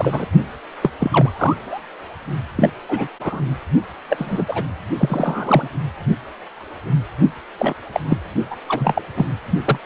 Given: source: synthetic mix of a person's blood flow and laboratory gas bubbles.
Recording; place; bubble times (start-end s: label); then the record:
Doppler ultrasound of blood flow; precordium
0.00-0.27 s: bubbles
0.81-0.90 s: bubbles
1.00-1.82 s: bubbles
2.56-2.69 s: bubbles
2.88-3.07 s: bubbles
3.20-3.41 s: bubbles
4.08-4.64 s: bubbles
4.98-5.69 s: bubbles
7.58-7.74 s: bubbles
7.94-8.00 s: bubbles
8.09-8.18 s: bubbles
8.51-8.56 s: bubbles
8.68-9.02 s: bubbles
9.14-9.26 s: bubbles
9.65-9.79 s: bubbles
From the record:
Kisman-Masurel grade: 233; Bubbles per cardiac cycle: several, 3 to 8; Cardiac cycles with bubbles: 50 to 99%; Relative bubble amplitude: loud (0.450 to 0.775); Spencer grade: 3 (all of the cardiac periods contain showers or single bubble signals, but not dominating or overriding the cardiac motion signals); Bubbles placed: only in the low amplitude regions of the cardiac cycle